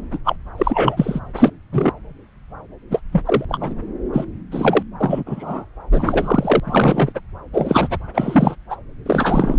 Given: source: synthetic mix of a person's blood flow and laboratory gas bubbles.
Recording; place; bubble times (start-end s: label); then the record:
Doppler ultrasound of blood flow; subclavian vein
0.12-0.18 s: bubbles
0.24-0.36 s: bubbles
0.57-1.19 s: bubbles
1.36-1.50 s: bubbles
1.72-1.92 s: bubbles
2.90-3.00 s: bubbles
3.12-3.23 s: bubbles
3.25-3.45 s: bubbles
3.48-3.75 s: bubbles
4.13-4.26 s: bubbles
4.51-4.83 s: bubbles
5.00-5.24 s: bubbles
5.26-5.64 s: bubbles
5.91-6.60 s: bubbles
6.64-7.12 s: bubbles
7.15-7.20 s: bubbles
7.53-7.98 s: bubbles
8.14-8.56 s: bubbles
8.70-8.77 s: bubbles
9.06-9.59 s: bubbles
From the record:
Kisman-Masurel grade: 233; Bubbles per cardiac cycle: several, 3 to 8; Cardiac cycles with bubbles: 50 to 99%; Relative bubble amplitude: loud (0.450 to 0.775); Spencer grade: 3 (all of the cardiac periods contain showers or single bubble signals, but not dominating or overriding the cardiac motion signals); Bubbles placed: anywhere in the cardiac cycle